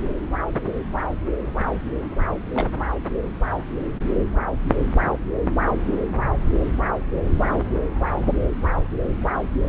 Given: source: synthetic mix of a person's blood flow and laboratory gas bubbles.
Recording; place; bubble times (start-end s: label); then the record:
Doppler ultrasound of blood flow; subclavian vein
2.54-2.67 s: bubbles
From the record:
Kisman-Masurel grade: 112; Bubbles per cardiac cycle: 1 to 2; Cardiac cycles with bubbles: 1 to 10%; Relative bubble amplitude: moderate (0.250 to 0.450); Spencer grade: 1 (occasional bubble signal discernible with the cardiac motion signal, with majority of cardiac periods free of bubbles); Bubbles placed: anywhere in the cardiac cycle